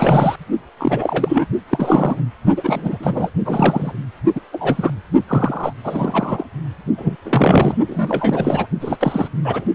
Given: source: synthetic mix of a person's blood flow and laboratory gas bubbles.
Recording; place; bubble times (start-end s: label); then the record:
Doppler ultrasound of blood flow; precordium
0.00-0.36 s: bubbles
0.77-1.47 s: bubbles
1.70-2.25 s: bubbles
2.56-3.30 s: bubbles
3.45-3.94 s: bubbles
4.35-4.41 s: bubbles
4.53-4.91 s: bubbles
5.28-5.73 s: bubbles
5.83-6.46 s: bubbles
6.98-7.16 s: bubbles
7.25-7.75 s: bubbles
7.86-8.66 s: bubbles
8.80-8.97 s: bubbles
9.00-9.28 s: bubbles
9.44-9.64 s: bubbles
From the record:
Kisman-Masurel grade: 343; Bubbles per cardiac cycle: rolling drumbeat, 9 or more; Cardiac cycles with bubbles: 100%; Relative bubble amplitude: loud (0.450 to 0.775); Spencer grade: 3 (all of the cardiac periods contain showers or single bubble signals, but not dominating or overriding the cardiac motion signals); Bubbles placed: only in the low amplitude regions of the cardiac cycle